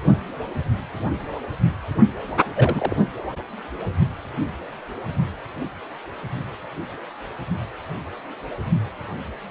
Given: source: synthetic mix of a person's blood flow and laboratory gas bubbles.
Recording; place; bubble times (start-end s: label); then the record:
Doppler ultrasound of blood flow; precordium
2.54-2.96 s: bubbles
From the record:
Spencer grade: 1 (occasional bubble signal discernible with the cardiac motion signal, with majority of cardiac periods free of bubbles); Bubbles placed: only in the low amplitude regions of the cardiac cycle